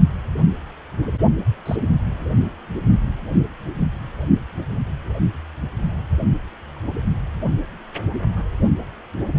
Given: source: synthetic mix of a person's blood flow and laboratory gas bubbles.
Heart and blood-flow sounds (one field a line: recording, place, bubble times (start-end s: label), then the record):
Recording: Doppler ultrasound of blood flow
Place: precordium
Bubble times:
1.66-1.77 s: bubbles
From the record:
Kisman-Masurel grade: 121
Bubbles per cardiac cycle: 1 to 2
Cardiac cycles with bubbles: 10 to 50%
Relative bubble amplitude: barely perceptible (0.100 to 0.250)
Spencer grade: 2 (many but less than half of the cardiac periods contain bubble signals, singularly or in groups)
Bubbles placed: anywhere in the cardiac cycle